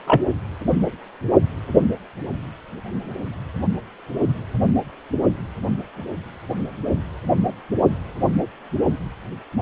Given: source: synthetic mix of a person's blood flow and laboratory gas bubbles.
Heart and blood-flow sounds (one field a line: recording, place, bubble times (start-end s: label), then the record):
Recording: Doppler ultrasound of blood flow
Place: precordium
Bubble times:
0.07-0.22 s: bubbles
From the record:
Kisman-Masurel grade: 113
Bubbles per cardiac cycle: 1 to 2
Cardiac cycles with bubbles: 1 to 10%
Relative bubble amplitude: loud (0.450 to 0.775)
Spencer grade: 1 (occasional bubble signal discernible with the cardiac motion signal, with majority of cardiac periods free of bubbles)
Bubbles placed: only in the low amplitude regions of the cardiac cycle